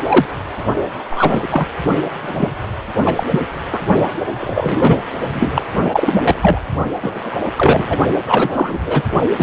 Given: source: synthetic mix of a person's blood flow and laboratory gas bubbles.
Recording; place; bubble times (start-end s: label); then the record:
Doppler ultrasound of blood flow; precordium
0.00-0.26 s: bubbles
1.10-1.47 s: bubbles
1.51-1.67 s: bubbles
2.21-2.48 s: bubbles
3.04-3.24 s: bubbles
3.30-3.40 s: bubbles
3.72-3.79 s: bubbles
4.40-4.96 s: bubbles
5.28-5.64 s: bubbles
5.92-6.62 s: bubbles
7.02-7.38 s: bubbles
7.58-7.97 s: bubbles
8.25-8.79 s: bubbles
8.86-9.03 s: bubbles
9.37-9.43 s: bubbles
From the record:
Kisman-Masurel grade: 243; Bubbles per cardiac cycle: several, 3 to 8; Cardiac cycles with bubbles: 100%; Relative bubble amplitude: loud (0.450 to 0.775); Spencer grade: 3 (all of the cardiac periods contain showers or single bubble signals, but not dominating or overriding the cardiac motion signals); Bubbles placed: only in the low amplitude regions of the cardiac cycle